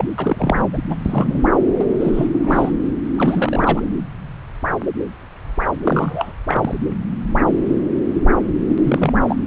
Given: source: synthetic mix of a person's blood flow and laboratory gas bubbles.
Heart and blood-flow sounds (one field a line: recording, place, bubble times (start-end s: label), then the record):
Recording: Doppler ultrasound of blood flow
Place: subclavian vein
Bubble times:
0.00-0.08 s: bubbles
0.18-0.67 s: bubbles
0.73-0.79 s: bubbles
0.88-0.95 s: bubbles
1.05-1.42 s: bubbles
1.79-1.84 s: bubbles
1.89-1.94 s: bubbles
1.99-2.29 s: bubbles
2.34-2.72 s: bubbles
3.17-3.83 s: bubbles
5.84-6.33 s: bubbles
6.47-6.78 s: bubbles
8.69-8.76 s: bubbles
8.84-9.13 s: bubbles
9.28-9.37 s: bubbles
From the record:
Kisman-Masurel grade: 232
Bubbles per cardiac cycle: several, 3 to 8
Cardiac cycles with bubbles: 50 to 99%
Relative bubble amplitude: moderate (0.250 to 0.450)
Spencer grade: 3 (all of the cardiac periods contain showers or single bubble signals, but not dominating or overriding the cardiac motion signals)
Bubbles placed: anywhere in the cardiac cycle